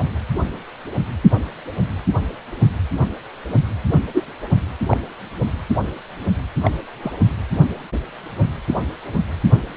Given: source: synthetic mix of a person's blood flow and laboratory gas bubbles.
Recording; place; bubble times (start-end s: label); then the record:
Doppler ultrasound of blood flow; precordium
4.14-4.25 s: bubbles
4.88-4.97 s: bubbles
6.62-6.71 s: bubbles
7.02-7.12 s: bubbles
From the record:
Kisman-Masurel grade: 122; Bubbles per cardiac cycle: 1 to 2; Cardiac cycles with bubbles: 10 to 50%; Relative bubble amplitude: moderate (0.250 to 0.450); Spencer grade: 2 (many but less than half of the cardiac periods contain bubble signals, singularly or in groups); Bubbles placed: anywhere in the cardiac cycle